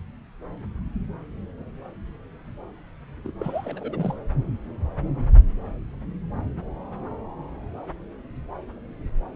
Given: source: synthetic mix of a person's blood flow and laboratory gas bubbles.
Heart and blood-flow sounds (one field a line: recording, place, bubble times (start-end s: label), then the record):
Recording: Doppler ultrasound of blood flow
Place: subclavian vein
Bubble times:
3.23-3.31 s: bubbles
3.40-4.16 s: bubbles
From the record:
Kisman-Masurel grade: 211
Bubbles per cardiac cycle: several, 3 to 8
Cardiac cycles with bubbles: 1 to 10%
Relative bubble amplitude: barely perceptible (0.100 to 0.250)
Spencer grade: 1 (occasional bubble signal discernible with the cardiac motion signal, with majority of cardiac periods free of bubbles)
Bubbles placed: anywhere in the cardiac cycle